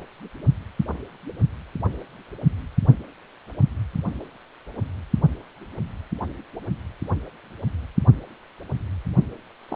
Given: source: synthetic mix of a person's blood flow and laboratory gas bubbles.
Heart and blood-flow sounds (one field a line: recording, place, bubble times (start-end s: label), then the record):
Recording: Doppler ultrasound of blood flow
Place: precordium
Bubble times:
9.69-9.76 s: bubbles
From the record:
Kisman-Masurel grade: 211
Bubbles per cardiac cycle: several, 3 to 8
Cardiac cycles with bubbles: 1 to 10%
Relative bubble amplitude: barely perceptible (0.100 to 0.250)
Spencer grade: 1 (occasional bubble signal discernible with the cardiac motion signal, with majority of cardiac periods free of bubbles)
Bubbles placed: only in the low amplitude regions of the cardiac cycle